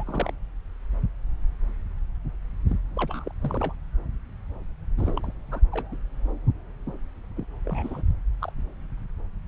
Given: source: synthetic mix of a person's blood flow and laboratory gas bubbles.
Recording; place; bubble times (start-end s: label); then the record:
Doppler ultrasound of blood flow; subclavian vein
0.00-0.33 s: bubbles
2.70-2.77 s: bubbles
2.96-3.31 s: bubbles
3.40-3.74 s: bubbles
4.98-5.12 s: bubbles
5.16-5.19 s: bubbles
5.23-5.32 s: bubbles
5.51-5.60 s: bubbles
5.71-5.96 s: bubbles
7.37-7.45 s: bubbles
7.65-8.02 s: bubbles
8.42-8.51 s: bubbles
From the record:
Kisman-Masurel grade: 221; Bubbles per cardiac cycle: several, 3 to 8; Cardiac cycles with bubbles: 10 to 50%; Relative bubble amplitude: barely perceptible (0.100 to 0.250); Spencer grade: 2 (many but less than half of the cardiac periods contain bubble signals, singularly or in groups); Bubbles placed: anywhere in the cardiac cycle